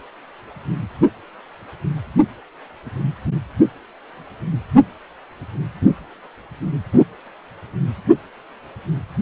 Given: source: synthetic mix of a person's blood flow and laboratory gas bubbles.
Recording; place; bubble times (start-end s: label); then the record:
Doppler ultrasound of blood flow; precordium
6.92-7.04 s: bubbles
From the record:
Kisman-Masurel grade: 113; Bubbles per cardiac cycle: 1 to 2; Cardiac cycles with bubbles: 1 to 10%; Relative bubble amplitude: loud (0.450 to 0.775); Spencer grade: 1 (occasional bubble signal discernible with the cardiac motion signal, with majority of cardiac periods free of bubbles); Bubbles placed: only in the low amplitude regions of the cardiac cycle